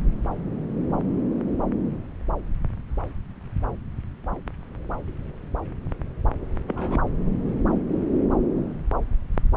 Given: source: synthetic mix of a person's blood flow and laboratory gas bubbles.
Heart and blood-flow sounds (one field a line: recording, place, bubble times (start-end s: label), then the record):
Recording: Doppler ultrasound of blood flow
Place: subclavian vein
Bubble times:
6.67-6.97 s: bubbles
From the record:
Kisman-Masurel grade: 112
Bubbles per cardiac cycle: 1 to 2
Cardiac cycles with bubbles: 1 to 10%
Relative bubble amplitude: moderate (0.250 to 0.450)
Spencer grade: 1 (occasional bubble signal discernible with the cardiac motion signal, with majority of cardiac periods free of bubbles)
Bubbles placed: anywhere in the cardiac cycle